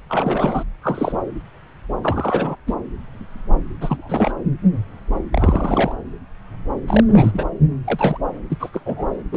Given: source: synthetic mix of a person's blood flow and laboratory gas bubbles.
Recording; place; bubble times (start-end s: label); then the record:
Doppler ultrasound of blood flow; subclavian vein
0.09-0.63 s: bubbles
0.82-1.22 s: bubbles
2.02-2.56 s: bubbles
2.67-2.75 s: bubbles
3.81-4.32 s: bubbles
5.32-5.93 s: bubbles
6.87-7.04 s: bubbles
7.07-7.48 s: bubbles
7.87-8.18 s: bubbles
8.50-8.70 s: bubbles
8.73-8.80 s: bubbles
8.85-9.07 s: bubbles
9.32-9.37 s: bubbles
From the record:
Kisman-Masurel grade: 232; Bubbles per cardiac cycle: several, 3 to 8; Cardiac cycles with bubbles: 50 to 99%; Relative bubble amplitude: moderate (0.250 to 0.450); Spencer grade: 3 (all of the cardiac periods contain showers or single bubble signals, but not dominating or overriding the cardiac motion signals); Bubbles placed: anywhere in the cardiac cycle